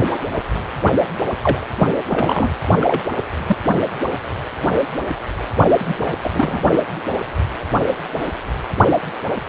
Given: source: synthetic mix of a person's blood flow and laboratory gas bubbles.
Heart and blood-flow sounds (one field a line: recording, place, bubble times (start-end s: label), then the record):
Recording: Doppler ultrasound of blood flow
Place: precordium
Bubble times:
1.42-1.65 s: bubbles
1.79-1.88 s: bubbles
2.09-2.50 s: bubbles
2.79-3.03 s: bubbles
3.46-3.57 s: bubbles
5.79-6.16 s: bubbles
6.23-6.62 s: bubbles
From the record:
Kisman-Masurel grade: 222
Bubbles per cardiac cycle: several, 3 to 8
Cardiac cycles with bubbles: 10 to 50%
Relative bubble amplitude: moderate (0.250 to 0.450)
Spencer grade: 2 (many but less than half of the cardiac periods contain bubble signals, singularly or in groups)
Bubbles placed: only in the low amplitude regions of the cardiac cycle